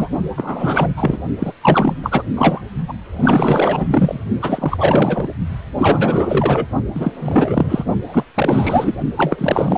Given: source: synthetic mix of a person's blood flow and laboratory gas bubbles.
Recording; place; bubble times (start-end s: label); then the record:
Doppler ultrasound of blood flow; precordium
0.00-0.08 s: bubbles
0.36-0.94 s: bubbles
0.96-1.22 s: bubbles
1.40-1.52 s: bubbles
1.61-1.94 s: bubbles
2.03-2.23 s: bubbles
2.36-2.62 s: bubbles
2.88-2.93 s: bubbles
3.16-4.24 s: bubbles
4.41-5.31 s: bubbles
5.75-6.65 s: bubbles
6.94-7.12 s: bubbles
7.19-7.84 s: bubbles
8.08-8.25 s: bubbles
8.34-8.95 s: bubbles
9.15-9.78 s: bubbles
From the record:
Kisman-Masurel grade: 444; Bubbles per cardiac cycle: continuous sound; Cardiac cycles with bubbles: 100%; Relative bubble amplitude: maximal (0.775 to 0.999); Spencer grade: 4 (maximum detectable bubble signal sounding continuously throughout systole and diastole of every cardiac period, and overriding the amplitude of the normal cardiac signals); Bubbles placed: only in the low amplitude regions of the cardiac cycle